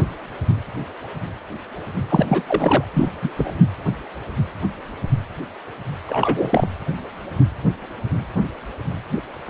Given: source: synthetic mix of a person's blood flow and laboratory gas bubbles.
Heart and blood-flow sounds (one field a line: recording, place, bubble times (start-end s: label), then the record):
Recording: Doppler ultrasound of blood flow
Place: precordium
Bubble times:
2.09-2.26 s: bubbles
2.28-2.43 s: bubbles
2.47-2.85 s: bubbles
2.93-3.10 s: bubbles
3.22-3.30 s: bubbles
3.36-3.52 s: bubbles
6.06-6.67 s: bubbles
9.46-9.50 s: bubbles
From the record:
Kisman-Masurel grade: 222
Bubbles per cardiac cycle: several, 3 to 8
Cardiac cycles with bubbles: 10 to 50%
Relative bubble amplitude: moderate (0.250 to 0.450)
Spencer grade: 2 (many but less than half of the cardiac periods contain bubble signals, singularly or in groups)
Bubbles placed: anywhere in the cardiac cycle